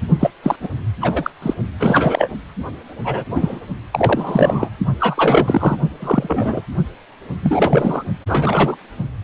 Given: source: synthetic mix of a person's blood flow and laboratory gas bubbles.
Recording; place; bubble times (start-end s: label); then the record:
Doppler ultrasound of blood flow; precordium
0.20-0.31 s: bubbles
0.42-0.56 s: bubbles
0.60-0.69 s: bubbles
1.01-1.31 s: bubbles
1.42-1.54 s: bubbles
1.80-2.31 s: bubbles
3.03-3.25 s: bubbles
3.30-3.60 s: bubbles
3.92-4.69 s: bubbles
5.00-5.76 s: bubbles
6.00-6.62 s: bubbles
7.42-8.04 s: bubbles
8.28-8.77 s: bubbles
From the record:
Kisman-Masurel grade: 243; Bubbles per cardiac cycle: several, 3 to 8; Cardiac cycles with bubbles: 100%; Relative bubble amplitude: loud (0.450 to 0.775); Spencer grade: 3 (all of the cardiac periods contain showers or single bubble signals, but not dominating or overriding the cardiac motion signals); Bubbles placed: only in the low amplitude regions of the cardiac cycle